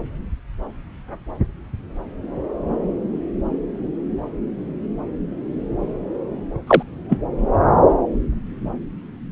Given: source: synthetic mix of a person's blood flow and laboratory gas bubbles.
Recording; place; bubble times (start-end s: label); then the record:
Doppler ultrasound of blood flow; subclavian vein
6.67-6.83 s: bubbles
7.09-7.19 s: bubbles
From the record:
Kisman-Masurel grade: 113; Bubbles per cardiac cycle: 1 to 2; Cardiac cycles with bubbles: 1 to 10%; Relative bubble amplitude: loud (0.450 to 0.775); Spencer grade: 1 (occasional bubble signal discernible with the cardiac motion signal, with majority of cardiac periods free of bubbles); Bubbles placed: anywhere in the cardiac cycle